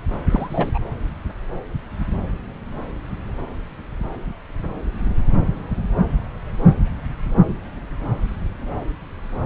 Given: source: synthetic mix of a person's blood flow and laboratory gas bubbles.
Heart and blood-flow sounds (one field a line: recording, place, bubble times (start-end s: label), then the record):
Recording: Doppler ultrasound of blood flow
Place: subclavian vein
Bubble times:
0.30-0.71 s: bubbles
0.74-0.79 s: bubbles
From the record:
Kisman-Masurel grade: 212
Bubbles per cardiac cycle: several, 3 to 8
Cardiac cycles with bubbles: 1 to 10%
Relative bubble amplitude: moderate (0.250 to 0.450)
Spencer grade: 1 (occasional bubble signal discernible with the cardiac motion signal, with majority of cardiac periods free of bubbles)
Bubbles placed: anywhere in the cardiac cycle